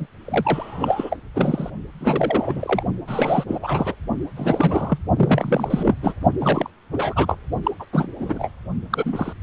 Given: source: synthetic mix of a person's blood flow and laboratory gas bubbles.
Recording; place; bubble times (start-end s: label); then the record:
Doppler ultrasound of blood flow; precordium
0.00-0.07 s: bubbles
0.25-1.17 s: bubbles
1.34-1.70 s: bubbles
2.00-2.83 s: bubbles
3.07-3.44 s: bubbles
3.48-3.95 s: bubbles
4.36-4.99 s: bubbles
5.16-5.95 s: bubbles
6.01-6.15 s: bubbles
6.41-6.70 s: bubbles
6.92-7.37 s: bubbles
7.64-7.71 s: bubbles
7.80-7.85 s: bubbles
7.92-8.07 s: bubbles
8.19-8.51 s: bubbles
8.90-9.33 s: bubbles
From the record:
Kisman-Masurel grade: 343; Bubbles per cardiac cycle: rolling drumbeat, 9 or more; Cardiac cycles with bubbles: 100%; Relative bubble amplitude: loud (0.450 to 0.775); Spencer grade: 3 (all of the cardiac periods contain showers or single bubble signals, but not dominating or overriding the cardiac motion signals); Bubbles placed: only in the low amplitude regions of the cardiac cycle